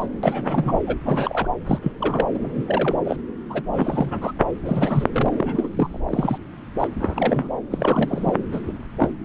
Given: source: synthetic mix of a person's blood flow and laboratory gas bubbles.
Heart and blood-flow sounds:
Doppler ultrasound of blood flow; subclavian vein
0.00-0.08 s: bubbles
0.23-0.79 s: bubbles
0.87-0.96 s: bubbles
1.05-1.48 s: bubbles
1.66-1.78 s: bubbles
1.81-1.92 s: bubbles
2.00-2.30 s: bubbles
2.35-2.39 s: bubbles
2.42-2.64 s: bubbles
2.67-2.96 s: bubbles
3.04-3.16 s: bubbles
3.50-3.62 s: bubbles
3.73-4.32 s: bubbles
4.62-5.04 s: bubbles
5.12-6.01 s: bubbles
6.10-6.38 s: bubbles
6.79-6.88 s: bubbles
6.99-7.51 s: bubbles
7.70-8.33 s: bubbles
8.52-8.60 s: bubbles
8.67-8.71 s: bubbles
8.99-9.11 s: bubbles
From the record:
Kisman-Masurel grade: 242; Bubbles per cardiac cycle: several, 3 to 8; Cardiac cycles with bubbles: 100%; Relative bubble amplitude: moderate (0.250 to 0.450); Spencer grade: 3 (all of the cardiac periods contain showers or single bubble signals, but not dominating or overriding the cardiac motion signals); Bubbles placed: anywhere in the cardiac cycle

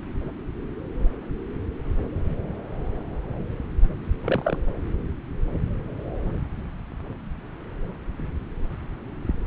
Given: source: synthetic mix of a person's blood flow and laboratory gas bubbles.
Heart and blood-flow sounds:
Doppler ultrasound of blood flow; subclavian vein
4.22-4.58 s: bubbles
From the record:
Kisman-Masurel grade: 111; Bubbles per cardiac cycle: 1 to 2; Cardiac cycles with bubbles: 1 to 10%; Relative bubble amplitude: barely perceptible (0.100 to 0.250); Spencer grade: 1 (occasional bubble signal discernible with the cardiac motion signal, with majority of cardiac periods free of bubbles); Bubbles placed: anywhere in the cardiac cycle

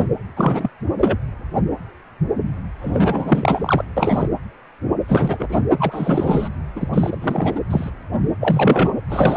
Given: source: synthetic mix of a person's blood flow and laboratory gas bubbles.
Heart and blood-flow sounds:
Doppler ultrasound of blood flow; precordium
0.00-0.08 s: bubbles
0.36-0.70 s: bubbles
0.97-1.17 s: bubbles
2.81-3.85 s: bubbles
3.97-4.29 s: bubbles
5.08-5.61 s: bubbles
5.79-6.49 s: bubbles
6.75-6.88 s: bubbles
6.93-7.61 s: bubbles
7.70-7.90 s: bubbles
8.40-8.92 s: bubbles
9.09-9.37 s: bubbles
From the record:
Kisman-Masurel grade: 333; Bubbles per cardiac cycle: rolling drumbeat, 9 or more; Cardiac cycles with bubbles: 50 to 99%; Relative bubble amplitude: loud (0.450 to 0.775); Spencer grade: 3 (all of the cardiac periods contain showers or single bubble signals, but not dominating or overriding the cardiac motion signals); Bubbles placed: anywhere in the cardiac cycle

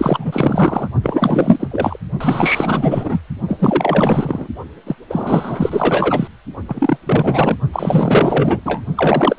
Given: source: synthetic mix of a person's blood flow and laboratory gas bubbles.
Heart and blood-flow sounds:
Doppler ultrasound of blood flow; precordium
0.00-0.88 s: bubbles
1.02-1.67 s: bubbles
1.71-1.98 s: bubbles
2.20-3.20 s: bubbles
3.48-4.48 s: bubbles
4.87-4.96 s: bubbles
5.09-6.27 s: bubbles
6.67-6.97 s: bubbles
7.06-7.56 s: bubbles
7.73-8.61 s: bubbles
8.65-8.81 s: bubbles
8.96-9.39 s: bubbles
From the record:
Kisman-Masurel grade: 444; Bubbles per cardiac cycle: continuous sound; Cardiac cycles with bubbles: 100%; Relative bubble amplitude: maximal (0.775 to 0.999); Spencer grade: 4 (maximum detectable bubble signal sounding continuously throughout systole and diastole of every cardiac period, and overriding the amplitude of the normal cardiac signals); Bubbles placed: only in the low amplitude regions of the cardiac cycle

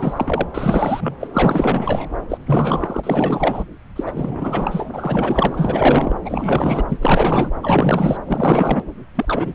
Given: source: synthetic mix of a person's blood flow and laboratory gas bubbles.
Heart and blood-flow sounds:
Doppler ultrasound of blood flow; subclavian vein
0.00-0.13 s: bubbles
0.16-0.47 s: bubbles
0.54-1.16 s: bubbles
1.20-1.27 s: bubbles
1.33-2.09 s: bubbles
2.29-2.38 s: bubbles
2.46-3.00 s: bubbles
3.03-3.64 s: bubbles
3.96-6.18 s: bubbles
6.25-6.84 s: bubbles
6.88-6.97 s: bubbles
7.01-7.52 s: bubbles
7.62-8.17 s: bubbles
8.27-8.82 s: bubbles
9.15-9.54 s: bubbles
From the record:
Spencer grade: 4 (maximum detectable bubble signal sounding continuously throughout systole and diastole of every cardiac period, and overriding the amplitude of the normal cardiac signals); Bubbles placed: anywhere in the cardiac cycle

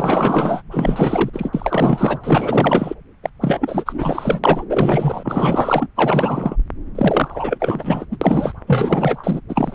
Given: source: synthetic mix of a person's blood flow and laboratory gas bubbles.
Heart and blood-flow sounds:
Doppler ultrasound of blood flow; subclavian vein
0.00-0.62 s: bubbles
0.70-1.30 s: bubbles
1.33-1.50 s: bubbles
1.53-2.19 s: bubbles
2.23-2.94 s: bubbles
3.23-3.29 s: bubbles
3.41-4.41 s: bubbles
4.44-4.65 s: bubbles
4.69-5.88 s: bubbles
5.96-6.57 s: bubbles
6.95-8.05 s: bubbles
8.12-8.18 s: bubbles
8.21-8.53 s: bubbles
8.67-9.41 s: bubbles
9.49-9.75 s: bubbles
From the record:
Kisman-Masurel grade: 444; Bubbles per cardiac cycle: continuous sound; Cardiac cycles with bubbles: 100%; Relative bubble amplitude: maximal (0.775 to 0.999); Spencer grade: 4 (maximum detectable bubble signal sounding continuously throughout systole and diastole of every cardiac period, and overriding the amplitude of the normal cardiac signals); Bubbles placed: anywhere in the cardiac cycle

